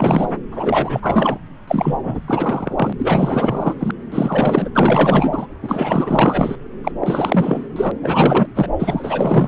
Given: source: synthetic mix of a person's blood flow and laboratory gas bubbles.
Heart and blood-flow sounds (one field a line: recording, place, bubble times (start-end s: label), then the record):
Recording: Doppler ultrasound of blood flow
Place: subclavian vein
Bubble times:
0.00-0.36 s: bubbles
0.50-1.38 s: bubbles
1.68-2.74 s: bubbles
2.77-2.93 s: bubbles
2.99-3.75 s: bubbles
3.79-3.91 s: bubbles
4.12-4.69 s: bubbles
4.75-5.46 s: bubbles
5.62-6.55 s: bubbles
6.83-6.92 s: bubbles
7.00-7.69 s: bubbles
7.76-7.92 s: bubbles
8.02-8.47 s: bubbles
8.55-8.68 s: bubbles
8.79-9.48 s: bubbles
From the record:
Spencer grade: 4 (maximum detectable bubble signal sounding continuously throughout systole and diastole of every cardiac period, and overriding the amplitude of the normal cardiac signals)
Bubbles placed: anywhere in the cardiac cycle